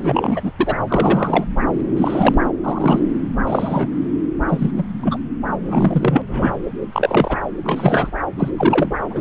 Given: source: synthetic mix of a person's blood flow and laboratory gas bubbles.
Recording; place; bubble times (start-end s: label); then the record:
Doppler ultrasound of blood flow; subclavian vein
0.00-0.52 s: bubbles
0.58-0.76 s: bubbles
0.88-1.45 s: bubbles
1.78-1.81 s: bubbles
1.97-2.36 s: bubbles
2.63-3.00 s: bubbles
3.47-3.88 s: bubbles
4.48-4.71 s: bubbles
4.77-4.84 s: bubbles
5.02-5.18 s: bubbles
5.62-6.22 s: bubbles
6.27-6.53 s: bubbles
6.64-6.66 s: bubbles
6.92-7.38 s: bubbles
7.63-8.11 s: bubbles
8.38-8.51 s: bubbles
8.57-8.95 s: bubbles
9.10-9.21 s: bubbles
From the record:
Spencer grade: 3 (all of the cardiac periods contain showers or single bubble signals, but not dominating or overriding the cardiac motion signals); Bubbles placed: anywhere in the cardiac cycle